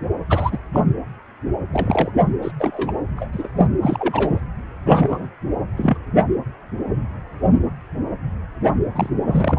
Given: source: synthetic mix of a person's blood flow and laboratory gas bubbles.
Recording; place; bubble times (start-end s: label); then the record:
Doppler ultrasound of blood flow; precordium
0.29-0.58 s: bubbles
0.73-0.80 s: bubbles
1.72-2.10 s: bubbles
2.42-2.52 s: bubbles
2.59-2.92 s: bubbles
3.17-3.28 s: bubbles
3.32-3.48 s: bubbles
3.57-3.67 s: bubbles
3.81-4.41 s: bubbles
4.85-5.29 s: bubbles
5.77-5.98 s: bubbles
8.95-9.09 s: bubbles
9.24-9.59 s: bubbles
From the record:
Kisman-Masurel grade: 232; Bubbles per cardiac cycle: several, 3 to 8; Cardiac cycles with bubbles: 50 to 99%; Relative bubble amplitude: moderate (0.250 to 0.450); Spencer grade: 3 (all of the cardiac periods contain showers or single bubble signals, but not dominating or overriding the cardiac motion signals); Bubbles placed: anywhere in the cardiac cycle